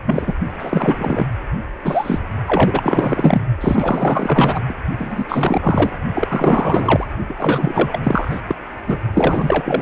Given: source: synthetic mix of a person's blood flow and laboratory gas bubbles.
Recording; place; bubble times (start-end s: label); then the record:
Doppler ultrasound of blood flow; precordium
0.05-0.34 s: bubbles
0.58-1.27 s: bubbles
1.84-2.21 s: bubbles
2.47-3.42 s: bubbles
3.60-4.62 s: bubbles
4.68-4.74 s: bubbles
4.99-5.96 s: bubbles
6.13-7.07 s: bubbles
7.29-7.99 s: bubbles
8.03-8.41 s: bubbles
8.47-8.55 s: bubbles
8.86-8.99 s: bubbles
9.14-9.82 s: bubbles
From the record:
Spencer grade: 4 (maximum detectable bubble signal sounding continuously throughout systole and diastole of every cardiac period, and overriding the amplitude of the normal cardiac signals); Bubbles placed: only in the low amplitude regions of the cardiac cycle